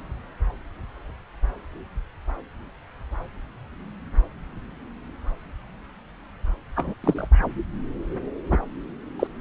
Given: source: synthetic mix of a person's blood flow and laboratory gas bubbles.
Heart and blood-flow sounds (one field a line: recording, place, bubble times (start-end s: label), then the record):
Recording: Doppler ultrasound of blood flow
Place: subclavian vein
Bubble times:
6.76-6.95 s: bubbles
7.04-7.28 s: bubbles
8.51-8.58 s: bubbles
9.19-9.27 s: bubbles
From the record:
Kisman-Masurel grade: 122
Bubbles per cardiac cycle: 1 to 2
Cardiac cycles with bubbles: 10 to 50%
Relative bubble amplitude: moderate (0.250 to 0.450)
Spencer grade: 2 (many but less than half of the cardiac periods contain bubble signals, singularly or in groups)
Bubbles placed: anywhere in the cardiac cycle